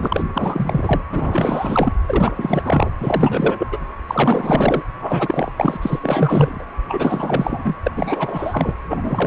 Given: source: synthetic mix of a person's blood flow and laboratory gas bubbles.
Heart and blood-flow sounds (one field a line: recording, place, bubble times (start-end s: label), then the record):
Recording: Doppler ultrasound of blood flow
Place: precordium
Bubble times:
0.00-0.23 s: bubbles
0.34-1.01 s: bubbles
1.11-1.92 s: bubbles
2.08-2.32 s: bubbles
2.35-2.90 s: bubbles
3.00-3.67 s: bubbles
3.71-3.79 s: bubbles
4.08-4.82 s: bubbles
5.00-5.52 s: bubbles
5.56-5.79 s: bubbles
5.81-6.64 s: bubbles
6.88-7.77 s: bubbles
7.86-7.91 s: bubbles
7.96-8.75 s: bubbles
8.88-9.27 s: bubbles
From the record:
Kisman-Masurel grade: 444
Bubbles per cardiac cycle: continuous sound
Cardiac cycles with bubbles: 100%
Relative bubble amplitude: maximal (0.775 to 0.999)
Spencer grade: 4 (maximum detectable bubble signal sounding continuously throughout systole and diastole of every cardiac period, and overriding the amplitude of the normal cardiac signals)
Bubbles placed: anywhere in the cardiac cycle